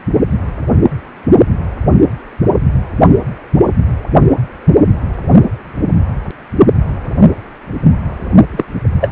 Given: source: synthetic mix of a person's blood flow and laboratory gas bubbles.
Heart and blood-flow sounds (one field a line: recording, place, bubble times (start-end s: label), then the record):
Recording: Doppler ultrasound of blood flow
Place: precordium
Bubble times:
8.53-8.64 s: bubbles
9.01-9.11 s: bubbles
From the record:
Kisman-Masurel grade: 113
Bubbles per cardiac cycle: 1 to 2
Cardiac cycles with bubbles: 1 to 10%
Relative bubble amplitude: loud (0.450 to 0.775)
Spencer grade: 1 (occasional bubble signal discernible with the cardiac motion signal, with majority of cardiac periods free of bubbles)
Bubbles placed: only in the low amplitude regions of the cardiac cycle